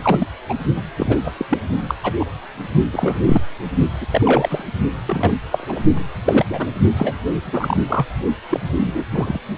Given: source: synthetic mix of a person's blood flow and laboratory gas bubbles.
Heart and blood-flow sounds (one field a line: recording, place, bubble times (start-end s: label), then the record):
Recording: Doppler ultrasound of blood flow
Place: precordium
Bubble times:
0.02-0.27 s: bubbles
0.49-0.54 s: bubbles
0.76-0.82 s: bubbles
0.97-1.18 s: bubbles
1.23-1.32 s: bubbles
1.37-1.45 s: bubbles
1.49-1.58 s: bubbles
1.88-1.94 s: bubbles
2.03-2.13 s: bubbles
2.19-2.25 s: bubbles
2.92-3.42 s: bubbles
4.01-4.06 s: bubbles
4.12-4.64 s: bubbles
5.06-5.34 s: bubbles
5.52-5.81 s: bubbles
5.96-6.04 s: bubbles
6.25-6.46 s: bubbles
6.49-6.71 s: bubbles
6.96-7.14 s: bubbles
7.45-7.77 s: bubbles
7.88-8.05 s: bubbles
8.50-8.60 s: bubbles
8.76-9.04 s: bubbles
9.12-9.38 s: bubbles
From the record:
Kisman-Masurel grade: 242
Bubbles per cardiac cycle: several, 3 to 8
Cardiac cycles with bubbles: 100%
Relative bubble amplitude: moderate (0.250 to 0.450)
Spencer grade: 3 (all of the cardiac periods contain showers or single bubble signals, but not dominating or overriding the cardiac motion signals)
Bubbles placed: only in the low amplitude regions of the cardiac cycle